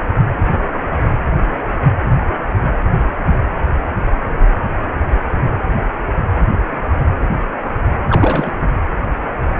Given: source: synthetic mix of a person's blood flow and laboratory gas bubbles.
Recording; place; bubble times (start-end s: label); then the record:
Doppler ultrasound of blood flow; precordium
8.09-8.54 s: bubbles
From the record:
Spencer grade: 1 (occasional bubble signal discernible with the cardiac motion signal, with majority of cardiac periods free of bubbles); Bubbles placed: anywhere in the cardiac cycle